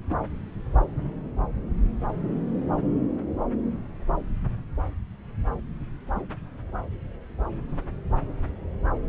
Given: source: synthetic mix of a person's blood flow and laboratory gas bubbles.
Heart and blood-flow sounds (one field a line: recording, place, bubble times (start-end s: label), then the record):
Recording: Doppler ultrasound of blood flow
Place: subclavian vein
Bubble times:
0.08-0.18 s: bubbles
From the record:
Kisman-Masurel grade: 112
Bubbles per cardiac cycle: 1 to 2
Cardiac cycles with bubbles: 1 to 10%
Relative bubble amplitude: moderate (0.250 to 0.450)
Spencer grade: 1 (occasional bubble signal discernible with the cardiac motion signal, with majority of cardiac periods free of bubbles)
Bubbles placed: anywhere in the cardiac cycle